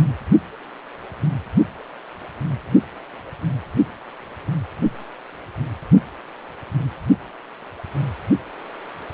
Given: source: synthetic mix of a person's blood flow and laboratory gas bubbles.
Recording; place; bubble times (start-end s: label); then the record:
Doppler ultrasound of blood flow; precordium
no bubbles
From the record:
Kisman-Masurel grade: 000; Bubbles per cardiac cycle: 0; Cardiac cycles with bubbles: 0%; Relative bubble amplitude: no bubbles discernible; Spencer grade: 0 (complete lack of bubble signals)